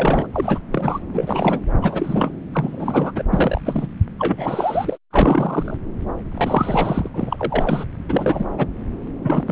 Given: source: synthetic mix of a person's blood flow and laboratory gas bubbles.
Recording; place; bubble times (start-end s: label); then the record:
Doppler ultrasound of blood flow; subclavian vein
0.00-0.27 s: bubbles
0.33-0.59 s: bubbles
0.72-0.99 s: bubbles
1.14-1.60 s: bubbles
1.81-2.34 s: bubbles
2.52-3.12 s: bubbles
3.15-3.23 s: bubbles
3.32-3.61 s: bubbles
3.65-3.87 s: bubbles
4.19-4.97 s: bubbles
5.12-5.77 s: bubbles
6.31-7.10 s: bubbles
7.14-7.86 s: bubbles
8.09-8.46 s: bubbles
8.57-8.67 s: bubbles
9.24-9.52 s: bubbles
From the record:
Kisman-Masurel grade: 343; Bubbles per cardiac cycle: rolling drumbeat, 9 or more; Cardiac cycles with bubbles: 100%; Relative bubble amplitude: loud (0.450 to 0.775); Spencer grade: 3 (all of the cardiac periods contain showers or single bubble signals, but not dominating or overriding the cardiac motion signals); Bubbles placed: anywhere in the cardiac cycle